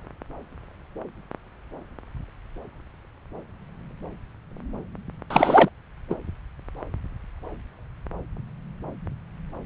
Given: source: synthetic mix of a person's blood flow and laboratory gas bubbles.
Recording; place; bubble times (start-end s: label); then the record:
Doppler ultrasound of blood flow; subclavian vein
5.30-5.70 s: bubbles
6.10-6.15 s: bubbles
From the record:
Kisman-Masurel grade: 213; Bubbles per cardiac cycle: several, 3 to 8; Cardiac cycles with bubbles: 1 to 10%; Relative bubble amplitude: loud (0.450 to 0.775); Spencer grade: 1 (occasional bubble signal discernible with the cardiac motion signal, with majority of cardiac periods free of bubbles); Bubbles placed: anywhere in the cardiac cycle